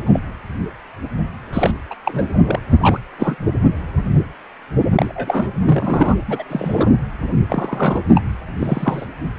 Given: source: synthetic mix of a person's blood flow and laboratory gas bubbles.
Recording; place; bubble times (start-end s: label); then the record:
Doppler ultrasound of blood flow; precordium
0.05-0.20 s: bubbles
1.52-1.72 s: bubbles
1.91-1.95 s: bubbles
2.05-2.38 s: bubbles
2.42-2.59 s: bubbles
2.80-3.00 s: bubbles
3.19-3.35 s: bubbles
4.96-5.50 s: bubbles
5.66-6.15 s: bubbles
6.28-6.43 s: bubbles
6.50-6.91 s: bubbles
7.49-8.01 s: bubbles
8.14-8.22 s: bubbles
8.58-9.05 s: bubbles
From the record:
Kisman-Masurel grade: 232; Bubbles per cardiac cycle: several, 3 to 8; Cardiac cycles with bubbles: 50 to 99%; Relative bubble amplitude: moderate (0.250 to 0.450); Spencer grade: 3 (all of the cardiac periods contain showers or single bubble signals, but not dominating or overriding the cardiac motion signals); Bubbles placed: anywhere in the cardiac cycle